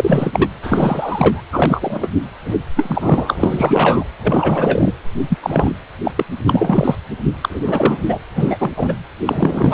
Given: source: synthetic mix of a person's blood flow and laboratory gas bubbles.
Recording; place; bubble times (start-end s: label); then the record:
Doppler ultrasound of blood flow; precordium
0.00-0.49 s: bubbles
0.62-1.42 s: bubbles
1.52-2.08 s: bubbles
2.44-2.56 s: bubbles
2.76-4.04 s: bubbles
4.22-4.93 s: bubbles
5.29-5.38 s: bubbles
5.42-5.73 s: bubbles
6.04-6.11 s: bubbles
6.15-6.25 s: bubbles
6.38-6.96 s: bubbles
7.41-8.18 s: bubbles
8.35-8.71 s: bubbles
8.77-8.97 s: bubbles
9.25-9.74 s: bubbles
From the record:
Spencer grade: 3 (all of the cardiac periods contain showers or single bubble signals, but not dominating or overriding the cardiac motion signals); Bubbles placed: anywhere in the cardiac cycle